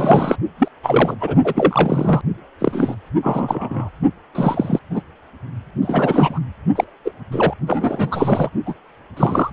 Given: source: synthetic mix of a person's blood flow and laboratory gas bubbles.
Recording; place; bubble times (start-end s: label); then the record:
Doppler ultrasound of blood flow; precordium
0.00-0.36 s: bubbles
0.58-0.68 s: bubbles
0.82-1.15 s: bubbles
1.21-1.35 s: bubbles
1.44-2.22 s: bubbles
2.60-2.96 s: bubbles
3.22-3.89 s: bubbles
4.34-4.79 s: bubbles
4.91-5.01 s: bubbles
5.82-6.40 s: bubbles
6.75-6.84 s: bubbles
7.04-7.12 s: bubbles
7.32-7.54 s: bubbles
7.67-8.49 s: bubbles
8.66-8.74 s: bubbles
9.16-9.50 s: bubbles
From the record:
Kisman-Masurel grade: 243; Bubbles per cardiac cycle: several, 3 to 8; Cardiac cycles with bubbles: 100%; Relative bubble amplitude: loud (0.450 to 0.775); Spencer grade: 3 (all of the cardiac periods contain showers or single bubble signals, but not dominating or overriding the cardiac motion signals); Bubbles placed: only in the low amplitude regions of the cardiac cycle